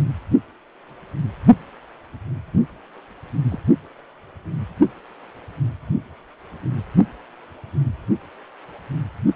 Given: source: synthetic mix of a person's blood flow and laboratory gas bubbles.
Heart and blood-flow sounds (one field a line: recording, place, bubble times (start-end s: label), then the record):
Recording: Doppler ultrasound of blood flow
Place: precordium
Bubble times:
3.51-3.59 s: bubbles
From the record:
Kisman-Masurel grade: 111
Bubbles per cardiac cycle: 1 to 2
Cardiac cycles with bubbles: 1 to 10%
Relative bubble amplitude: barely perceptible (0.100 to 0.250)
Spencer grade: 1 (occasional bubble signal discernible with the cardiac motion signal, with majority of cardiac periods free of bubbles)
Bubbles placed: only in the low amplitude regions of the cardiac cycle